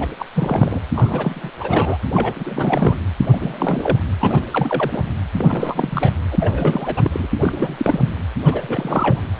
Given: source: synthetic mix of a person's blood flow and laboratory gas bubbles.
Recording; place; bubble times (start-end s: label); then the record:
Doppler ultrasound of blood flow; precordium
0.00-0.08 s: bubbles
0.19-0.25 s: bubbles
0.35-0.81 s: bubbles
0.95-1.51 s: bubbles
1.60-1.98 s: bubbles
2.14-2.95 s: bubbles
3.32-3.37 s: bubbles
3.40-3.98 s: bubbles
4.19-4.42 s: bubbles
4.51-5.02 s: bubbles
5.38-6.13 s: bubbles
6.30-6.36 s: bubbles
6.39-7.27 s: bubbles
7.36-8.17 s: bubbles
8.45-9.21 s: bubbles
From the record:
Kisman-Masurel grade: 342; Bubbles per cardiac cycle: rolling drumbeat, 9 or more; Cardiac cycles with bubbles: 100%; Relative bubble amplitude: moderate (0.250 to 0.450); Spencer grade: 3 (all of the cardiac periods contain showers or single bubble signals, but not dominating or overriding the cardiac motion signals); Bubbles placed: anywhere in the cardiac cycle